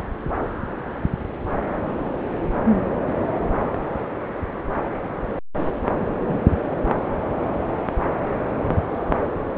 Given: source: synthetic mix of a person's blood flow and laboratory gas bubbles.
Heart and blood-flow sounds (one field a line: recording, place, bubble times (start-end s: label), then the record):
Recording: Doppler ultrasound of blood flow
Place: subclavian vein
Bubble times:
6.21-6.42 s: bubbles
From the record:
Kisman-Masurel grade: 112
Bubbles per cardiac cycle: 1 to 2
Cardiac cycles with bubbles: 1 to 10%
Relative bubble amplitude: moderate (0.250 to 0.450)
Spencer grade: 1 (occasional bubble signal discernible with the cardiac motion signal, with majority of cardiac periods free of bubbles)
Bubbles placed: anywhere in the cardiac cycle